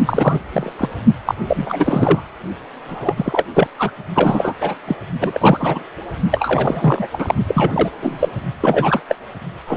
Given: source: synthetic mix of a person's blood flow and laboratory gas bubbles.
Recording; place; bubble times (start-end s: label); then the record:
Doppler ultrasound of blood flow; precordium
0.05-0.39 s: bubbles
0.52-0.72 s: bubbles
0.78-0.88 s: bubbles
1.26-1.34 s: bubbles
1.47-2.21 s: bubbles
2.88-3.14 s: bubbles
3.17-3.45 s: bubbles
3.54-3.67 s: bubbles
3.79-3.92 s: bubbles
4.15-4.54 s: bubbles
4.61-4.75 s: bubbles
4.88-4.96 s: bubbles
5.21-5.82 s: bubbles
6.31-7.08 s: bubbles
7.11-7.35 s: bubbles
7.47-7.89 s: bubbles
8.02-8.29 s: bubbles
8.60-9.02 s: bubbles
9.08-9.15 s: bubbles
9.67-9.77 s: bubbles
From the record:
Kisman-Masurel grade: 343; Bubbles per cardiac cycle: rolling drumbeat, 9 or more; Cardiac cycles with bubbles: 100%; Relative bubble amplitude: loud (0.450 to 0.775); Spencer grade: 3 (all of the cardiac periods contain showers or single bubble signals, but not dominating or overriding the cardiac motion signals); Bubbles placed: only in the low amplitude regions of the cardiac cycle